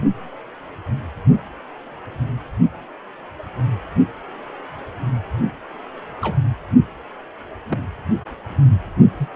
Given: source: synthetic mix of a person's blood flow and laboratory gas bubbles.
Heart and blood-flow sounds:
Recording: Doppler ultrasound of blood flow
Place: precordium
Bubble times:
6.21-6.37 s: bubbles
7.68-7.78 s: bubbles
9.18-9.28 s: bubbles
From the record:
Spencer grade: 2 (many but less than half of the cardiac periods contain bubble signals, singularly or in groups)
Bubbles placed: only in the low amplitude regions of the cardiac cycle

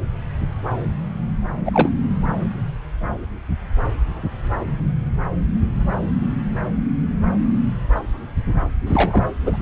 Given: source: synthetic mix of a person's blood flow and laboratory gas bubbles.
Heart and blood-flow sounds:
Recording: Doppler ultrasound of blood flow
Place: subclavian vein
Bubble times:
1.65-1.91 s: bubbles
8.87-9.24 s: bubbles
9.41-9.62 s: bubbles
From the record:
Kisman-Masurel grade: 212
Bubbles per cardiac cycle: several, 3 to 8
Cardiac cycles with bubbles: 1 to 10%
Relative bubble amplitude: moderate (0.250 to 0.450)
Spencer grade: 1 (occasional bubble signal discernible with the cardiac motion signal, with majority of cardiac periods free of bubbles)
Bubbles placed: anywhere in the cardiac cycle

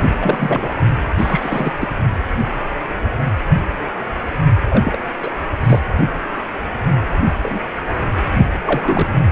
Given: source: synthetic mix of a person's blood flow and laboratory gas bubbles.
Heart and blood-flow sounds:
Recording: Doppler ultrasound of blood flow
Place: precordium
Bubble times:
0.00-0.12 s: bubbles
0.23-0.73 s: bubbles
1.18-1.72 s: bubbles
1.80-1.89 s: bubbles
4.70-4.97 s: bubbles
5.21-5.30 s: bubbles
5.65-5.80 s: bubbles
7.25-7.33 s: bubbles
7.42-7.59 s: bubbles
7.75-7.82 s: bubbles
8.37-8.46 s: bubbles
8.64-9.08 s: bubbles
From the record:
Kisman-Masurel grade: 232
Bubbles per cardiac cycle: several, 3 to 8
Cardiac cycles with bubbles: 50 to 99%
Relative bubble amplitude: moderate (0.250 to 0.450)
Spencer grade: 3 (all of the cardiac periods contain showers or single bubble signals, but not dominating or overriding the cardiac motion signals)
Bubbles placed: anywhere in the cardiac cycle

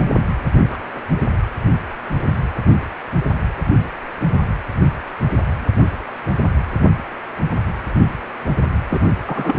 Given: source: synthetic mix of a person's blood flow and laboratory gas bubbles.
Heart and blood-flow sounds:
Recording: Doppler ultrasound of blood flow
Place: precordium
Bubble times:
0.58-0.79 s: bubbles
0.95-1.01 s: bubbles
8.90-8.99 s: bubbles
9.26-9.59 s: bubbles
From the record:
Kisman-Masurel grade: 222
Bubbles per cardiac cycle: several, 3 to 8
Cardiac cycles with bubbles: 10 to 50%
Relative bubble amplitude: moderate (0.250 to 0.450)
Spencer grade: 2 (many but less than half of the cardiac periods contain bubble signals, singularly or in groups)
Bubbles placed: anywhere in the cardiac cycle

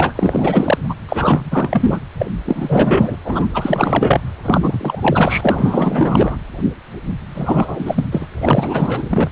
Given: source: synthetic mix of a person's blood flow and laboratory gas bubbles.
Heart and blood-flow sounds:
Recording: Doppler ultrasound of blood flow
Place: precordium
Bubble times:
0.00-0.13 s: bubbles
0.15-0.79 s: bubbles
0.89-0.95 s: bubbles
1.08-2.00 s: bubbles
2.18-2.32 s: bubbles
2.45-3.17 s: bubbles
3.24-3.47 s: bubbles
3.54-4.21 s: bubbles
4.43-6.37 s: bubbles
7.35-8.05 s: bubbles
8.12-8.28 s: bubbles
8.39-9.29 s: bubbles
From the record:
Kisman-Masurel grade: 444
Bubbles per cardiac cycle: continuous sound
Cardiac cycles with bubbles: 100%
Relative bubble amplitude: maximal (0.775 to 0.999)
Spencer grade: 4 (maximum detectable bubble signal sounding continuously throughout systole and diastole of every cardiac period, and overriding the amplitude of the normal cardiac signals)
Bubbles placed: anywhere in the cardiac cycle

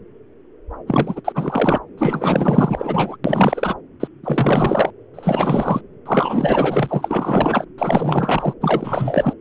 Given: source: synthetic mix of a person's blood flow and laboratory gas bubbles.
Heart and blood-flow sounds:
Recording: Doppler ultrasound of blood flow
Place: subclavian vein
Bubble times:
0.87-1.21 s: bubbles
1.24-1.77 s: bubbles
1.98-3.16 s: bubbles
3.24-3.75 s: bubbles
4.00-4.08 s: bubbles
4.24-4.91 s: bubbles
5.13-5.81 s: bubbles
6.05-7.64 s: bubbles
7.78-8.54 s: bubbles
8.61-9.34 s: bubbles
From the record:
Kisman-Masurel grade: 444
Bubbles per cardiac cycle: continuous sound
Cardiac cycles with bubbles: 100%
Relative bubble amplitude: maximal (0.775 to 0.999)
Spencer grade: 4 (maximum detectable bubble signal sounding continuously throughout systole and diastole of every cardiac period, and overriding the amplitude of the normal cardiac signals)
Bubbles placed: anywhere in the cardiac cycle

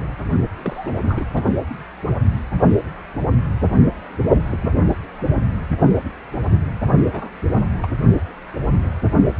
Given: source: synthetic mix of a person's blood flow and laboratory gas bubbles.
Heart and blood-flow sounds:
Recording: Doppler ultrasound of blood flow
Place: precordium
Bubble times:
0.57-1.43 s: bubbles
4.49-4.57 s: bubbles
4.59-4.71 s: bubbles
5.16-5.22 s: bubbles
5.36-5.42 s: bubbles
7.04-7.29 s: bubbles
7.53-7.59 s: bubbles
7.78-7.88 s: bubbles
From the record:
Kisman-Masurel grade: 221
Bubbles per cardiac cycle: several, 3 to 8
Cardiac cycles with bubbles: 10 to 50%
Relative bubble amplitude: barely perceptible (0.100 to 0.250)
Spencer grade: 2 (many but less than half of the cardiac periods contain bubble signals, singularly or in groups)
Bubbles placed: only in the low amplitude regions of the cardiac cycle

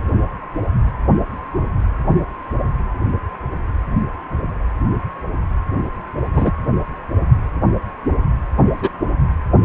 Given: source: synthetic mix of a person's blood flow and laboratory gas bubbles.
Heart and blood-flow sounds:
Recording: Doppler ultrasound of blood flow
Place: precordium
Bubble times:
6.33-6.51 s: bubbles
8.73-8.90 s: bubbles
From the record:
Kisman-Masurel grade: 113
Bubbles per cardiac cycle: 1 to 2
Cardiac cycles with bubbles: 1 to 10%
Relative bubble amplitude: loud (0.450 to 0.775)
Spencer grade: 1 (occasional bubble signal discernible with the cardiac motion signal, with majority of cardiac periods free of bubbles)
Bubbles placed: anywhere in the cardiac cycle

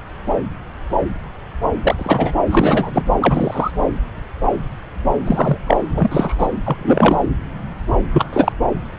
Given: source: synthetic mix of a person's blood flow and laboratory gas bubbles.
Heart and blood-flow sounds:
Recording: Doppler ultrasound of blood flow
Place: subclavian vein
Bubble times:
1.82-2.31 s: bubbles
2.51-2.91 s: bubbles
2.93-3.03 s: bubbles
3.20-3.71 s: bubbles
5.25-5.57 s: bubbles
5.67-5.77 s: bubbles
5.95-6.34 s: bubbles
6.38-6.48 s: bubbles
6.64-7.18 s: bubbles
8.13-8.25 s: bubbles
8.33-8.52 s: bubbles
From the record:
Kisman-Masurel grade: 233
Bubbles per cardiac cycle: several, 3 to 8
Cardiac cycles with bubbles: 50 to 99%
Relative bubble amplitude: loud (0.450 to 0.775)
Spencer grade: 3 (all of the cardiac periods contain showers or single bubble signals, but not dominating or overriding the cardiac motion signals)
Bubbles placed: anywhere in the cardiac cycle

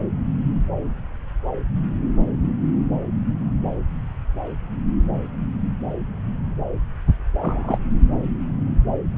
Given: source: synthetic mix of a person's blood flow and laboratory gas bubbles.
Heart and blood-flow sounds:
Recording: Doppler ultrasound of blood flow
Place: subclavian vein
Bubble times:
7.41-7.78 s: bubbles
From the record:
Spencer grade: 2 (many but less than half of the cardiac periods contain bubble signals, singularly or in groups)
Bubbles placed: anywhere in the cardiac cycle

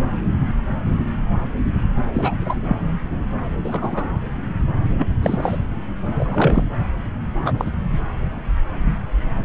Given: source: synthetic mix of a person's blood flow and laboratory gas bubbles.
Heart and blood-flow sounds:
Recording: Doppler ultrasound of blood flow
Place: subclavian vein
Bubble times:
2.13-2.34 s: bubbles
2.41-2.57 s: bubbles
2.66-2.77 s: bubbles
3.64-4.08 s: bubbles
4.98-5.08 s: bubbles
5.22-5.58 s: bubbles
6.17-6.65 s: bubbles
7.45-7.53 s: bubbles
7.57-7.71 s: bubbles
7.93-7.98 s: bubbles
9.43-9.45 s: bubbles
From the record:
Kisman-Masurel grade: 232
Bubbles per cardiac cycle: several, 3 to 8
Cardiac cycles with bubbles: 50 to 99%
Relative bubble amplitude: moderate (0.250 to 0.450)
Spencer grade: 3 (all of the cardiac periods contain showers or single bubble signals, but not dominating or overriding the cardiac motion signals)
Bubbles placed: anywhere in the cardiac cycle

